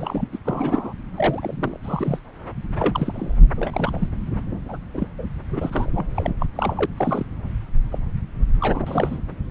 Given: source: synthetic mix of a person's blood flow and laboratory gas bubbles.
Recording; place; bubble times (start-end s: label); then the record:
Doppler ultrasound of blood flow; subclavian vein
0.00-0.28 s: bubbles
0.32-0.39 s: bubbles
0.44-0.93 s: bubbles
1.17-1.77 s: bubbles
1.83-2.19 s: bubbles
2.79-3.38 s: bubbles
3.56-4.08 s: bubbles
4.69-4.78 s: bubbles
4.94-5.08 s: bubbles
5.19-5.26 s: bubbles
5.50-5.92 s: bubbles
5.95-6.05 s: bubbles
6.15-6.33 s: bubbles
6.40-6.46 s: bubbles
6.55-6.86 s: bubbles
6.97-7.25 s: bubbles
7.92-7.99 s: bubbles
8.60-8.81 s: bubbles
8.86-9.18 s: bubbles
From the record:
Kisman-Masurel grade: 242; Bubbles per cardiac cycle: several, 3 to 8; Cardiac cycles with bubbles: 100%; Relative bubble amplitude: moderate (0.250 to 0.450); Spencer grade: 3 (all of the cardiac periods contain showers or single bubble signals, but not dominating or overriding the cardiac motion signals); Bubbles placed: anywhere in the cardiac cycle